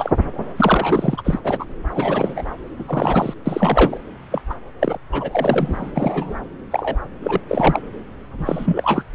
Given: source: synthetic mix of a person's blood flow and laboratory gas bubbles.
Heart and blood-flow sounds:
Doppler ultrasound of blood flow; subclavian vein
0.00-0.12 s: bubbles
0.56-1.22 s: bubbles
1.24-1.40 s: bubbles
1.44-1.65 s: bubbles
1.96-2.51 s: bubbles
2.78-3.34 s: bubbles
3.46-3.97 s: bubbles
4.31-4.42 s: bubbles
4.50-4.54 s: bubbles
4.80-4.97 s: bubbles
5.12-5.92 s: bubbles
5.96-6.34 s: bubbles
6.71-6.96 s: bubbles
7.23-7.40 s: bubbles
7.48-7.81 s: bubbles
8.38-9.03 s: bubbles
From the record:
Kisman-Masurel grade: 243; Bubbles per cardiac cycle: several, 3 to 8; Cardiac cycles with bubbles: 100%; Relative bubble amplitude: loud (0.450 to 0.775); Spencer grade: 3 (all of the cardiac periods contain showers or single bubble signals, but not dominating or overriding the cardiac motion signals); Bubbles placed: anywhere in the cardiac cycle

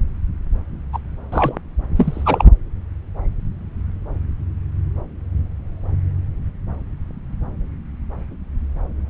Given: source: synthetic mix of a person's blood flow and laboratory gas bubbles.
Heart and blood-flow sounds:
Doppler ultrasound of blood flow; subclavian vein
0.92-0.99 s: bubbles
1.32-1.60 s: bubbles
1.96-2.45 s: bubbles
From the record:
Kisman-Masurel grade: 223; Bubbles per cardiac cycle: several, 3 to 8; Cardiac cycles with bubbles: 10 to 50%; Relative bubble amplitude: loud (0.450 to 0.775); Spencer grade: 2 (many but less than half of the cardiac periods contain bubble signals, singularly or in groups); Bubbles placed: anywhere in the cardiac cycle

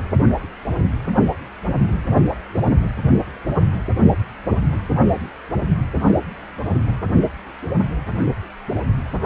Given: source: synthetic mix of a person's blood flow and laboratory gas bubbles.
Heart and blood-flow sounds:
Doppler ultrasound of blood flow; precordium
no bubbles
From the record:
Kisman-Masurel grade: 000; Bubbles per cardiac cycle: 0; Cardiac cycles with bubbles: 0%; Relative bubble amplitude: no bubbles discernible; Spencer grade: 0 (complete lack of bubble signals)

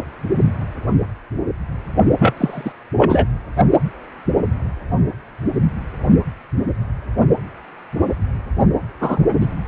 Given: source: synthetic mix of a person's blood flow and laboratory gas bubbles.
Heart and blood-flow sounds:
Doppler ultrasound of blood flow; precordium
2.19-2.33 s: bubbles
2.37-2.73 s: bubbles
2.97-3.27 s: bubbles
9.00-9.23 s: bubbles
9.28-9.33 s: bubbles
9.40-9.46 s: bubbles
From the record:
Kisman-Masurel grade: 223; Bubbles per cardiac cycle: several, 3 to 8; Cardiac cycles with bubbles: 10 to 50%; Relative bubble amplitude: loud (0.450 to 0.775); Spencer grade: 2 (many but less than half of the cardiac periods contain bubble signals, singularly or in groups); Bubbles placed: only in the low amplitude regions of the cardiac cycle

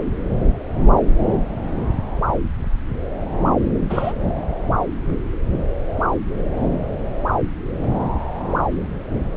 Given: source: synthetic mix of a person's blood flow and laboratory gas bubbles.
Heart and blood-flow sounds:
Doppler ultrasound of blood flow; subclavian vein
3.89-4.13 s: bubbles
From the record:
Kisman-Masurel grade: 113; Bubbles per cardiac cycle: 1 to 2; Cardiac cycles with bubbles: 1 to 10%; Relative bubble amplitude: loud (0.450 to 0.775); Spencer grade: 1 (occasional bubble signal discernible with the cardiac motion signal, with majority of cardiac periods free of bubbles); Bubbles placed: anywhere in the cardiac cycle

